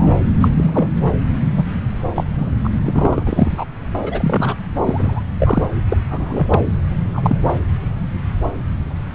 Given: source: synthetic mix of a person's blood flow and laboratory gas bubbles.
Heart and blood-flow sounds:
Doppler ultrasound of blood flow; subclavian vein
0.00-0.08 s: bubbles
0.41-0.48 s: bubbles
0.56-0.88 s: bubbles
1.56-1.63 s: bubbles
2.15-2.51 s: bubbles
2.64-2.70 s: bubbles
2.83-3.65 s: bubbles
3.95-4.55 s: bubbles
4.83-5.22 s: bubbles
5.39-5.68 s: bubbles
5.88-5.97 s: bubbles
6.09-6.47 s: bubbles
6.50-6.60 s: bubbles
6.65-6.78 s: bubbles
7.13-7.38 s: bubbles
From the record:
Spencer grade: 3 (all of the cardiac periods contain showers or single bubble signals, but not dominating or overriding the cardiac motion signals); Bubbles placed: anywhere in the cardiac cycle

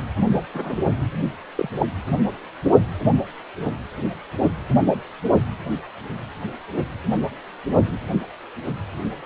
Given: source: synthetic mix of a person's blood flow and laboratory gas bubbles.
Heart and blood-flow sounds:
Doppler ultrasound of blood flow; precordium
0.54-0.78 s: bubbles
1.55-1.69 s: bubbles
1.79-1.86 s: bubbles
From the record:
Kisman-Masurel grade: 122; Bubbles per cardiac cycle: 1 to 2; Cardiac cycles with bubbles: 10 to 50%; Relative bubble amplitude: moderate (0.250 to 0.450); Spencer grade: 2 (many but less than half of the cardiac periods contain bubble signals, singularly or in groups); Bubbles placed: only in the low amplitude regions of the cardiac cycle

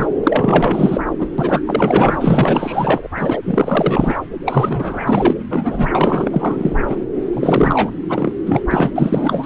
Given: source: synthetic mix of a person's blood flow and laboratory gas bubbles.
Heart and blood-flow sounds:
Doppler ultrasound of blood flow; subclavian vein
0.00-0.07 s: bubbles
0.23-1.01 s: bubbles
1.19-1.28 s: bubbles
1.38-1.62 s: bubbles
1.65-3.07 s: bubbles
3.17-3.40 s: bubbles
3.45-4.18 s: bubbles
4.45-5.34 s: bubbles
5.50-5.92 s: bubbles
5.95-6.98 s: bubbles
7.33-7.91 s: bubbles
8.08-8.31 s: bubbles
8.46-8.62 s: bubbles
8.71-8.90 s: bubbles
8.94-9.46 s: bubbles
From the record:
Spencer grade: 4 (maximum detectable bubble signal sounding continuously throughout systole and diastole of every cardiac period, and overriding the amplitude of the normal cardiac signals); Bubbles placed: anywhere in the cardiac cycle

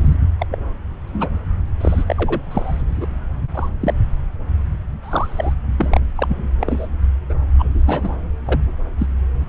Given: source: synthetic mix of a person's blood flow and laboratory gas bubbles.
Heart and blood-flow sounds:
Doppler ultrasound of blood flow; subclavian vein
0.00-0.17 s: bubbles
0.39-0.47 s: bubbles
0.49-0.60 s: bubbles
1.07-1.41 s: bubbles
1.80-2.40 s: bubbles
2.50-2.83 s: bubbles
3.01-3.08 s: bubbles
3.54-3.69 s: bubbles
3.81-3.94 s: bubbles
5.03-5.54 s: bubbles
5.78-6.00 s: bubbles
6.16-6.48 s: bubbles
6.59-6.88 s: bubbles
7.29-7.34 s: bubbles
7.59-7.82 s: bubbles
7.86-8.17 s: bubbles
8.45-8.61 s: bubbles
8.98-9.06 s: bubbles
From the record:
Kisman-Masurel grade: 242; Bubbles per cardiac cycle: several, 3 to 8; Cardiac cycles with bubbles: 100%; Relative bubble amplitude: moderate (0.250 to 0.450); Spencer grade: 3 (all of the cardiac periods contain showers or single bubble signals, but not dominating or overriding the cardiac motion signals); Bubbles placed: anywhere in the cardiac cycle

